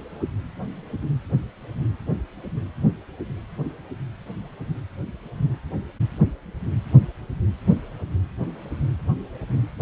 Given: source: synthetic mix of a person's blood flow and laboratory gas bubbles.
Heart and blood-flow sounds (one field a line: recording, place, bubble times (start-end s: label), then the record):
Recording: Doppler ultrasound of blood flow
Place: precordium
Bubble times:
no bubbles
From the record:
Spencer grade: 0 (complete lack of bubble signals)